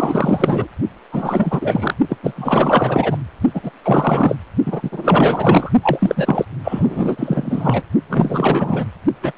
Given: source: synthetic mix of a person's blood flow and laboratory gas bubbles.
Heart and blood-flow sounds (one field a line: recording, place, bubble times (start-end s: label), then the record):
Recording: Doppler ultrasound of blood flow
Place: precordium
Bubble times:
0.00-0.68 s: bubbles
1.11-1.94 s: bubbles
2.08-2.17 s: bubbles
2.23-3.18 s: bubbles
3.54-3.71 s: bubbles
3.83-4.37 s: bubbles
4.66-5.72 s: bubbles
5.83-6.45 s: bubbles
6.64-7.83 s: bubbles
8.09-8.85 s: bubbles
9.22-9.32 s: bubbles
From the record:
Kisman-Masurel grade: 444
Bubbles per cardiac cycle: continuous sound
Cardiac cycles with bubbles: 100%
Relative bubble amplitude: maximal (0.775 to 0.999)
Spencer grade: 4 (maximum detectable bubble signal sounding continuously throughout systole and diastole of every cardiac period, and overriding the amplitude of the normal cardiac signals)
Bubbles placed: only in the low amplitude regions of the cardiac cycle